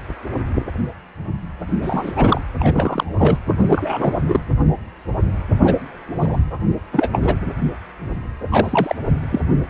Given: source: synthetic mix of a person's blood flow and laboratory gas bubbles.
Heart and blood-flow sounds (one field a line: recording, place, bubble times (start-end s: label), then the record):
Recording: Doppler ultrasound of blood flow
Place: precordium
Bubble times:
1.82-2.12 s: bubbles
2.16-2.41 s: bubbles
2.59-3.04 s: bubbles
3.17-3.38 s: bubbles
3.66-4.13 s: bubbles
4.28-4.40 s: bubbles
5.62-5.76 s: bubbles
6.20-6.37 s: bubbles
6.92-7.09 s: bubbles
7.12-7.35 s: bubbles
8.51-8.96 s: bubbles
9.29-9.41 s: bubbles
From the record:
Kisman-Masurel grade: 233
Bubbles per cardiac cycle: several, 3 to 8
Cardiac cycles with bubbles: 50 to 99%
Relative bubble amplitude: loud (0.450 to 0.775)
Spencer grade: 3 (all of the cardiac periods contain showers or single bubble signals, but not dominating or overriding the cardiac motion signals)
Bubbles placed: anywhere in the cardiac cycle